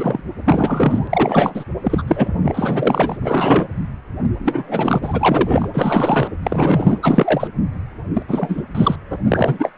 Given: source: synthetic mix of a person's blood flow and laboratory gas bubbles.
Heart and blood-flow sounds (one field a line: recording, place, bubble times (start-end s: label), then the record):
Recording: Doppler ultrasound of blood flow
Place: precordium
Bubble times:
0.00-0.21 s: bubbles
0.44-1.64 s: bubbles
1.84-2.03 s: bubbles
2.07-3.17 s: bubbles
3.21-3.68 s: bubbles
4.39-4.99 s: bubbles
5.02-5.69 s: bubbles
5.74-6.28 s: bubbles
6.43-7.48 s: bubbles
8.13-8.22 s: bubbles
8.28-8.63 s: bubbles
8.74-8.96 s: bubbles
9.10-9.18 s: bubbles
9.28-9.72 s: bubbles
From the record:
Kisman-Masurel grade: 343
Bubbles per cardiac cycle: rolling drumbeat, 9 or more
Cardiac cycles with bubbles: 100%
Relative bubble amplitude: loud (0.450 to 0.775)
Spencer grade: 3 (all of the cardiac periods contain showers or single bubble signals, but not dominating or overriding the cardiac motion signals)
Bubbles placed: anywhere in the cardiac cycle